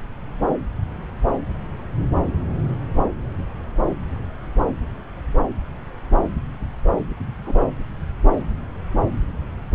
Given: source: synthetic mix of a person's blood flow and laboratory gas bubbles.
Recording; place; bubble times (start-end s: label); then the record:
Doppler ultrasound of blood flow; subclavian vein
7.45-7.65 s: bubbles
From the record:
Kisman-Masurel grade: 111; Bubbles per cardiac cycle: 1 to 2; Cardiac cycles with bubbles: 1 to 10%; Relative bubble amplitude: barely perceptible (0.100 to 0.250); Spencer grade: 1 (occasional bubble signal discernible with the cardiac motion signal, with majority of cardiac periods free of bubbles); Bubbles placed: anywhere in the cardiac cycle